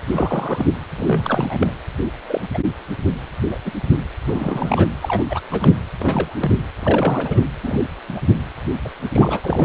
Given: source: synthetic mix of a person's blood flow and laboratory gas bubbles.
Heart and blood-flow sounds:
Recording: Doppler ultrasound of blood flow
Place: precordium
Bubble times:
0.07-0.66 s: bubbles
0.97-1.73 s: bubbles
2.29-2.41 s: bubbles
2.54-2.58 s: bubbles
3.51-3.58 s: bubbles
3.65-3.72 s: bubbles
4.27-4.87 s: bubbles
5.01-5.23 s: bubbles
5.30-5.41 s: bubbles
5.51-5.73 s: bubbles
5.99-6.34 s: bubbles
6.39-6.51 s: bubbles
6.56-6.63 s: bubbles
6.79-7.40 s: bubbles
7.63-7.87 s: bubbles
8.08-8.20 s: bubbles
8.84-8.88 s: bubbles
9.11-9.40 s: bubbles
9.43-9.65 s: bubbles
From the record:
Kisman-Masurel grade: 242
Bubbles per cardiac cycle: several, 3 to 8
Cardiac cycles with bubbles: 100%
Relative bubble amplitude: moderate (0.250 to 0.450)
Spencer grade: 3 (all of the cardiac periods contain showers or single bubble signals, but not dominating or overriding the cardiac motion signals)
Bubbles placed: anywhere in the cardiac cycle

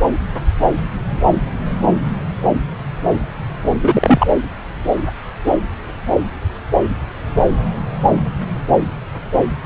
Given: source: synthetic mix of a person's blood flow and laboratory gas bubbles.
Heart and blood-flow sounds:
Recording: Doppler ultrasound of blood flow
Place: subclavian vein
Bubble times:
3.82-4.27 s: bubbles
From the record:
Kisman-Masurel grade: 113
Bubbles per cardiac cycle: 1 to 2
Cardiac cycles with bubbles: 1 to 10%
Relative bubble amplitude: loud (0.450 to 0.775)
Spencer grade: 1 (occasional bubble signal discernible with the cardiac motion signal, with majority of cardiac periods free of bubbles)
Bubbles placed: anywhere in the cardiac cycle

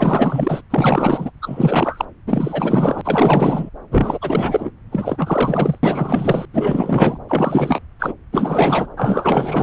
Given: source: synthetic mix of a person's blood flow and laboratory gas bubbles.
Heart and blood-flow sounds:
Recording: Doppler ultrasound of blood flow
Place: subclavian vein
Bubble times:
0.00-0.61 s: bubbles
0.70-1.31 s: bubbles
1.42-2.05 s: bubbles
2.26-3.01 s: bubbles
3.04-3.69 s: bubbles
3.91-4.18 s: bubbles
4.21-4.71 s: bubbles
4.92-5.79 s: bubbles
5.83-6.46 s: bubbles
6.52-7.18 s: bubbles
7.28-7.81 s: bubbles
7.99-8.13 s: bubbles
8.32-8.88 s: bubbles
8.96-9.63 s: bubbles
From the record:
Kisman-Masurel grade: 444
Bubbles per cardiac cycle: continuous sound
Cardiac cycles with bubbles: 100%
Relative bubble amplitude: maximal (0.775 to 0.999)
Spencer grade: 4 (maximum detectable bubble signal sounding continuously throughout systole and diastole of every cardiac period, and overriding the amplitude of the normal cardiac signals)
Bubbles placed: anywhere in the cardiac cycle

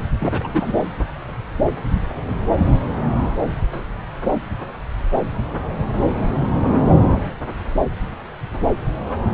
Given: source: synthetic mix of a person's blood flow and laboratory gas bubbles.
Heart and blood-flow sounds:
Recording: Doppler ultrasound of blood flow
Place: subclavian vein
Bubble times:
0.20-0.73 s: bubbles
From the record:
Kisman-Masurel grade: 212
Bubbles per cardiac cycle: several, 3 to 8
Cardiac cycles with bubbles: 1 to 10%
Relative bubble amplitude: moderate (0.250 to 0.450)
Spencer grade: 1 (occasional bubble signal discernible with the cardiac motion signal, with majority of cardiac periods free of bubbles)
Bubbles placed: anywhere in the cardiac cycle

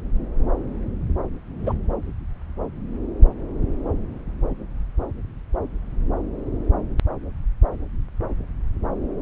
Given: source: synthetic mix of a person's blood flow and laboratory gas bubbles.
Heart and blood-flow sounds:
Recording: Doppler ultrasound of blood flow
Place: subclavian vein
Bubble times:
1.66-1.73 s: bubbles
From the record:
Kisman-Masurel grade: 113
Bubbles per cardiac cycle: 1 to 2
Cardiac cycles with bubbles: 1 to 10%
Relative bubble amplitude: loud (0.450 to 0.775)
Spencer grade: 1 (occasional bubble signal discernible with the cardiac motion signal, with majority of cardiac periods free of bubbles)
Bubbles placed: anywhere in the cardiac cycle

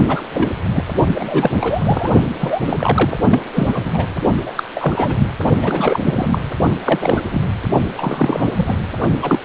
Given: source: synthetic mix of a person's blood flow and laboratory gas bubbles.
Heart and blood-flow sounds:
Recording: Doppler ultrasound of blood flow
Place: precordium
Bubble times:
0.08-0.24 s: bubbles
0.32-0.61 s: bubbles
0.73-0.84 s: bubbles
1.06-1.50 s: bubbles
1.60-2.11 s: bubbles
2.40-3.17 s: bubbles
3.29-3.39 s: bubbles
3.53-3.82 s: bubbles
3.85-3.91 s: bubbles
3.93-4.06 s: bubbles
4.46-4.51 s: bubbles
4.56-4.63 s: bubbles
4.75-5.27 s: bubbles
5.62-6.01 s: bubbles
6.04-6.38 s: bubbles
6.84-7.21 s: bubbles
7.30-7.42 s: bubbles
7.97-8.49 s: bubbles
8.56-8.76 s: bubbles
9.22-9.39 s: bubbles
From the record:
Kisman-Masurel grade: 342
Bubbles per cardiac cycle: rolling drumbeat, 9 or more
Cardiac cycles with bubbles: 100%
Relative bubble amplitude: moderate (0.250 to 0.450)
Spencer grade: 3 (all of the cardiac periods contain showers or single bubble signals, but not dominating or overriding the cardiac motion signals)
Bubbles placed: only in the low amplitude regions of the cardiac cycle

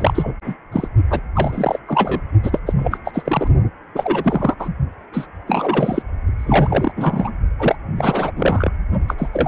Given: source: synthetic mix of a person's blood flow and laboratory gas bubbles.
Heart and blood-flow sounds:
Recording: Doppler ultrasound of blood flow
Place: precordium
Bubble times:
0.00-0.35 s: bubbles
0.44-0.55 s: bubbles
0.72-0.88 s: bubbles
1.10-1.21 s: bubbles
1.34-1.79 s: bubbles
1.88-2.25 s: bubbles
2.42-2.59 s: bubbles
2.66-2.74 s: bubbles
2.79-2.98 s: bubbles
3.04-3.48 s: bubbles
3.94-4.55 s: bubbles
4.59-4.69 s: bubbles
5.12-5.27 s: bubbles
5.47-6.02 s: bubbles
6.38-6.93 s: bubbles
6.96-7.30 s: bubbles
7.59-7.76 s: bubbles
7.96-8.32 s: bubbles
8.36-8.71 s: bubbles
9.07-9.14 s: bubbles
9.18-9.48 s: bubbles
From the record:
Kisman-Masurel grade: 343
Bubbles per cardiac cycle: rolling drumbeat, 9 or more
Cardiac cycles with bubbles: 100%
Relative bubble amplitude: loud (0.450 to 0.775)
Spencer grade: 3 (all of the cardiac periods contain showers or single bubble signals, but not dominating or overriding the cardiac motion signals)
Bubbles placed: only in the low amplitude regions of the cardiac cycle

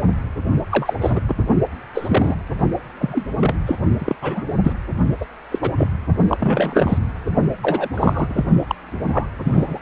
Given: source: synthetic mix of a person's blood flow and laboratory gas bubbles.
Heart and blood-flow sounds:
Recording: Doppler ultrasound of blood flow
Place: precordium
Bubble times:
0.70-0.93 s: bubbles
1.00-1.20 s: bubbles
1.28-1.35 s: bubbles
1.94-2.35 s: bubbles
3.00-3.26 s: bubbles
3.40-3.55 s: bubbles
3.66-3.76 s: bubbles
3.98-4.15 s: bubbles
4.21-4.45 s: bubbles
4.63-4.73 s: bubbles
5.21-5.25 s: bubbles
5.51-5.59 s: bubbles
5.61-5.71 s: bubbles
5.77-5.88 s: bubbles
6.27-6.37 s: bubbles
6.39-6.98 s: bubbles
7.62-7.89 s: bubbles
7.94-8.43 s: bubbles
8.67-8.75 s: bubbles
9.12-9.27 s: bubbles
9.44-9.80 s: bubbles
From the record:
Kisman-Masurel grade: 242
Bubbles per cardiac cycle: several, 3 to 8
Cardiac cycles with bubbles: 100%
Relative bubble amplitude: moderate (0.250 to 0.450)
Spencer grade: 3 (all of the cardiac periods contain showers or single bubble signals, but not dominating or overriding the cardiac motion signals)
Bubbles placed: only in the low amplitude regions of the cardiac cycle

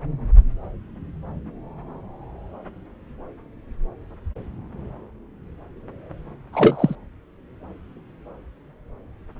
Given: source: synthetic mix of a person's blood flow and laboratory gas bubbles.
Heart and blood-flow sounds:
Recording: Doppler ultrasound of blood flow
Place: subclavian vein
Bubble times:
6.53-6.95 s: bubbles
From the record:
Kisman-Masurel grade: 213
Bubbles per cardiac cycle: several, 3 to 8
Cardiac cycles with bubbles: 1 to 10%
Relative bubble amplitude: loud (0.450 to 0.775)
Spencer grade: 1 (occasional bubble signal discernible with the cardiac motion signal, with majority of cardiac periods free of bubbles)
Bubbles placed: anywhere in the cardiac cycle

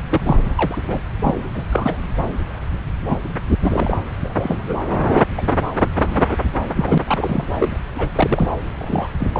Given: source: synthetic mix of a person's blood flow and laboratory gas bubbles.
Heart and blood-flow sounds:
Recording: Doppler ultrasound of blood flow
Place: subclavian vein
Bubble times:
0.10-0.39 s: bubbles
0.55-0.78 s: bubbles
0.83-1.01 s: bubbles
1.19-1.35 s: bubbles
1.53-1.64 s: bubbles
1.70-1.98 s: bubbles
3.01-3.16 s: bubbles
3.63-3.95 s: bubbles
4.22-4.79 s: bubbles
5.06-5.22 s: bubbles
5.37-5.42 s: bubbles
5.99-6.36 s: bubbles
6.76-6.98 s: bubbles
7.07-7.46 s: bubbles
7.58-7.77 s: bubbles
7.96-8.09 s: bubbles
8.15-8.50 s: bubbles
8.79-9.07 s: bubbles
9.19-9.28 s: bubbles
9.32-9.40 s: bubbles
From the record:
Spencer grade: 3 (all of the cardiac periods contain showers or single bubble signals, but not dominating or overriding the cardiac motion signals)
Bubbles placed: anywhere in the cardiac cycle

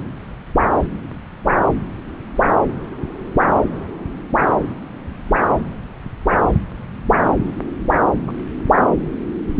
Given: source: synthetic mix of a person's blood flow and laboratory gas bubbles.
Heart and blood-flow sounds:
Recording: Doppler ultrasound of blood flow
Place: subclavian vein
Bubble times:
8.27-8.31 s: bubbles
From the record:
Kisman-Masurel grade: 112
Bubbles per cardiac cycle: 1 to 2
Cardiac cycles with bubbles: 1 to 10%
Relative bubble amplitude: moderate (0.250 to 0.450)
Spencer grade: 1 (occasional bubble signal discernible with the cardiac motion signal, with majority of cardiac periods free of bubbles)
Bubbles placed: anywhere in the cardiac cycle

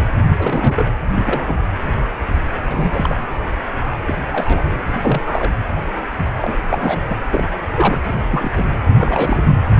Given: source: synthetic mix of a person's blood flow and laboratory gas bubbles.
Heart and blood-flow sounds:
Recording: Doppler ultrasound of blood flow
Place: precordium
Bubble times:
0.32-0.90 s: bubbles
1.14-1.56 s: bubbles
2.67-3.19 s: bubbles
4.07-4.14 s: bubbles
4.28-4.72 s: bubbles
4.99-5.52 s: bubbles
5.76-5.83 s: bubbles
6.42-6.58 s: bubbles
6.69-6.99 s: bubbles
7.08-7.20 s: bubbles
7.30-7.49 s: bubbles
7.75-8.01 s: bubbles
8.05-8.15 s: bubbles
8.30-8.53 s: bubbles
8.56-8.65 s: bubbles
8.98-9.42 s: bubbles
9.75-9.80 s: bubbles
From the record:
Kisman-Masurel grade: 232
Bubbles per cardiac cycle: several, 3 to 8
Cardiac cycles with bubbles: 50 to 99%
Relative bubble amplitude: moderate (0.250 to 0.450)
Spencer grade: 3 (all of the cardiac periods contain showers or single bubble signals, but not dominating or overriding the cardiac motion signals)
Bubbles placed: anywhere in the cardiac cycle

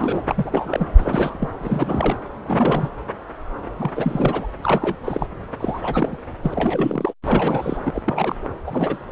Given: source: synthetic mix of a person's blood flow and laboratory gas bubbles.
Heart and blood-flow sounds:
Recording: Doppler ultrasound of blood flow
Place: subclavian vein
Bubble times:
0.00-0.21 s: bubbles
0.30-0.89 s: bubbles
0.98-1.50 s: bubbles
1.60-2.17 s: bubbles
2.44-2.89 s: bubbles
3.78-3.90 s: bubbles
3.96-4.46 s: bubbles
4.63-4.96 s: bubbles
5.04-5.26 s: bubbles
5.59-6.17 s: bubbles
6.42-7.13 s: bubbles
7.22-7.77 s: bubbles
7.85-8.02 s: bubbles
8.04-8.36 s: bubbles
8.66-8.97 s: bubbles
From the record:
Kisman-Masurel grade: 332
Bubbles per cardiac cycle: rolling drumbeat, 9 or more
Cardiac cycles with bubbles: 50 to 99%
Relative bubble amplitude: moderate (0.250 to 0.450)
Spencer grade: 3 (all of the cardiac periods contain showers or single bubble signals, but not dominating or overriding the cardiac motion signals)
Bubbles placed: anywhere in the cardiac cycle

